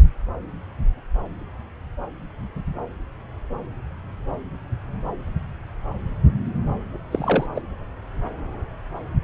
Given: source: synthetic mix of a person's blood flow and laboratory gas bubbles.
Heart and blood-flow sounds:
Doppler ultrasound of blood flow; subclavian vein
7.11-7.46 s: bubbles
7.55-7.62 s: bubbles
From the record:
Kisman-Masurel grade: 212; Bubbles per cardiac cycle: several, 3 to 8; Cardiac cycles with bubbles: 1 to 10%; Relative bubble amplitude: moderate (0.250 to 0.450); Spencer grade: 1 (occasional bubble signal discernible with the cardiac motion signal, with majority of cardiac periods free of bubbles); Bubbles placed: anywhere in the cardiac cycle

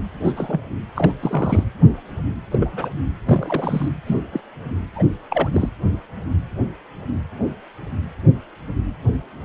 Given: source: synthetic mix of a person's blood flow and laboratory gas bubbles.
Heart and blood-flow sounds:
Doppler ultrasound of blood flow; precordium
0.24-0.33 s: bubbles
0.36-0.61 s: bubbles
0.95-1.13 s: bubbles
1.20-1.64 s: bubbles
2.51-2.70 s: bubbles
2.73-2.91 s: bubbles
3.25-3.88 s: bubbles
4.05-4.21 s: bubbles
4.33-4.40 s: bubbles
4.96-5.04 s: bubbles
5.30-5.49 s: bubbles
5.53-5.69 s: bubbles
From the record:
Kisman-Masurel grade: 232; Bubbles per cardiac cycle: several, 3 to 8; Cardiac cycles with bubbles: 50 to 99%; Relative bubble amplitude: moderate (0.250 to 0.450); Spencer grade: 3 (all of the cardiac periods contain showers or single bubble signals, but not dominating or overriding the cardiac motion signals); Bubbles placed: anywhere in the cardiac cycle

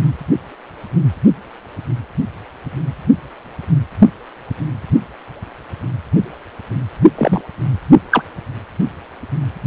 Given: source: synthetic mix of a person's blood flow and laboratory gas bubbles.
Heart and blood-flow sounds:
Doppler ultrasound of blood flow; precordium
7.18-7.41 s: bubbles
8.11-8.22 s: bubbles
From the record:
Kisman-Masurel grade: 113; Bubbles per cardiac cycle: 1 to 2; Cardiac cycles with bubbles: 1 to 10%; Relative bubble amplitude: loud (0.450 to 0.775); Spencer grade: 1 (occasional bubble signal discernible with the cardiac motion signal, with majority of cardiac periods free of bubbles); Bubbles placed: only in the low amplitude regions of the cardiac cycle

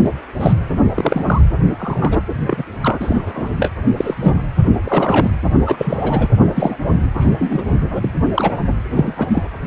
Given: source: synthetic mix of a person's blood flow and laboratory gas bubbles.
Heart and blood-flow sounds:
Doppler ultrasound of blood flow; precordium
0.00-0.12 s: bubbles
0.40-0.53 s: bubbles
0.94-1.42 s: bubbles
1.78-2.18 s: bubbles
2.47-2.64 s: bubbles
2.81-3.49 s: bubbles
3.57-3.72 s: bubbles
3.97-4.41 s: bubbles
4.85-5.31 s: bubbles
5.66-6.29 s: bubbles
6.55-6.77 s: bubbles
7.15-7.32 s: bubbles
7.39-7.63 s: bubbles
8.01-8.09 s: bubbles
8.34-8.52 s: bubbles
8.96-9.13 s: bubbles
9.17-9.46 s: bubbles
From the record:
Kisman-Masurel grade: 243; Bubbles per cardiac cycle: several, 3 to 8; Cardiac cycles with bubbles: 100%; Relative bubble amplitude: loud (0.450 to 0.775); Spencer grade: 3 (all of the cardiac periods contain showers or single bubble signals, but not dominating or overriding the cardiac motion signals); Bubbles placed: anywhere in the cardiac cycle

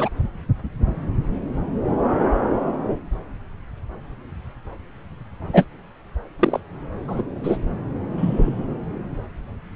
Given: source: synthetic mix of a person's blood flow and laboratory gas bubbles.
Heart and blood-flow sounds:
Doppler ultrasound of blood flow; subclavian vein
0.00-0.09 s: bubbles
5.53-5.65 s: bubbles
6.39-6.60 s: bubbles
7.08-7.22 s: bubbles
7.43-7.58 s: bubbles
8.17-8.65 s: bubbles
From the record:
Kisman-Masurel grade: 123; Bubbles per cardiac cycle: 1 to 2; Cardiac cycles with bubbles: 10 to 50%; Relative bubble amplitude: loud (0.450 to 0.775); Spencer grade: 2 (many but less than half of the cardiac periods contain bubble signals, singularly or in groups); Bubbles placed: anywhere in the cardiac cycle

